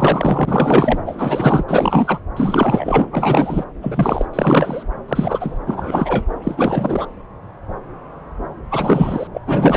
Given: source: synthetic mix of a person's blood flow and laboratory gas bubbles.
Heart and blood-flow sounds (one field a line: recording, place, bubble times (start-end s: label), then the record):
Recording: Doppler ultrasound of blood flow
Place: subclavian vein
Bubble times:
0.00-0.99 s: bubbles
1.06-1.64 s: bubbles
1.67-2.21 s: bubbles
2.37-3.05 s: bubbles
3.12-3.65 s: bubbles
3.81-4.25 s: bubbles
4.33-4.83 s: bubbles
5.08-5.58 s: bubbles
5.66-6.24 s: bubbles
6.43-7.06 s: bubbles
8.71-9.28 s: bubbles
9.33-9.41 s: bubbles
9.47-9.77 s: bubbles
From the record:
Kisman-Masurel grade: 333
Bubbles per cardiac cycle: rolling drumbeat, 9 or more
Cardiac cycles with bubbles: 50 to 99%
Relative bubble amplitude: loud (0.450 to 0.775)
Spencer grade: 3 (all of the cardiac periods contain showers or single bubble signals, but not dominating or overriding the cardiac motion signals)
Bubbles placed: anywhere in the cardiac cycle